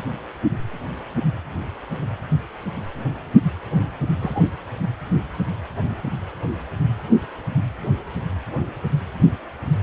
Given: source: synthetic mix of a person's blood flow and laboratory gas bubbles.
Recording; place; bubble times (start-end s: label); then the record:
Doppler ultrasound of blood flow; precordium
4.19-4.43 s: bubbles
From the record:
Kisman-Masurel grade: 112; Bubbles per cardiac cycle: 1 to 2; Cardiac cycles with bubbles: 1 to 10%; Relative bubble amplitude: moderate (0.250 to 0.450); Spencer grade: 1 (occasional bubble signal discernible with the cardiac motion signal, with majority of cardiac periods free of bubbles); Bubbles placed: anywhere in the cardiac cycle